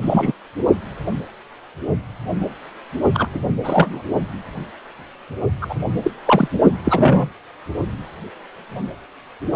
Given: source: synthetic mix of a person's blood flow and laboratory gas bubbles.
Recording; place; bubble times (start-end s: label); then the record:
Doppler ultrasound of blood flow; precordium
0.02-0.32 s: bubbles
3.14-3.45 s: bubbles
3.64-4.02 s: bubbles
5.61-5.66 s: bubbles
5.69-5.75 s: bubbles
6.02-6.10 s: bubbles
6.25-6.48 s: bubbles
6.84-7.29 s: bubbles
From the record:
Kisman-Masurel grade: 223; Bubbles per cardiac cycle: several, 3 to 8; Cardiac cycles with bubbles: 10 to 50%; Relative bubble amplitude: loud (0.450 to 0.775); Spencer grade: 2 (many but less than half of the cardiac periods contain bubble signals, singularly or in groups); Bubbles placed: only in the low amplitude regions of the cardiac cycle